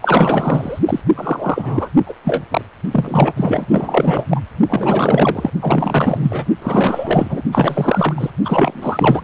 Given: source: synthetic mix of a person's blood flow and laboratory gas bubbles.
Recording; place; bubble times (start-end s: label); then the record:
Doppler ultrasound of blood flow; precordium
0.02-0.80 s: bubbles
0.85-1.00 s: bubbles
1.15-1.90 s: bubbles
2.06-2.14 s: bubbles
2.24-2.43 s: bubbles
2.51-2.62 s: bubbles
2.91-3.33 s: bubbles
3.37-4.40 s: bubbles
4.67-5.50 s: bubbles
5.61-6.47 s: bubbles
6.62-7.42 s: bubbles
7.51-8.30 s: bubbles
8.45-9.24 s: bubbles
From the record:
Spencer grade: 4 (maximum detectable bubble signal sounding continuously throughout systole and diastole of every cardiac period, and overriding the amplitude of the normal cardiac signals); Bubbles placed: only in the low amplitude regions of the cardiac cycle